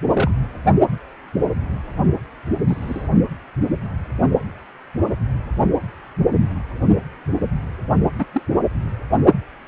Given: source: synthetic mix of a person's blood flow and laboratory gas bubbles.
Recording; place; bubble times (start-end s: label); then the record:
Doppler ultrasound of blood flow; precordium
0.13-0.31 s: bubbles
2.67-3.08 s: bubbles
8.18-8.26 s: bubbles
8.32-8.42 s: bubbles
From the record:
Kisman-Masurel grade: 122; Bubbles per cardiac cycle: 1 to 2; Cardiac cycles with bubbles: 10 to 50%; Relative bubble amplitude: moderate (0.250 to 0.450); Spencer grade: 2 (many but less than half of the cardiac periods contain bubble signals, singularly or in groups); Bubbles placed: only in the low amplitude regions of the cardiac cycle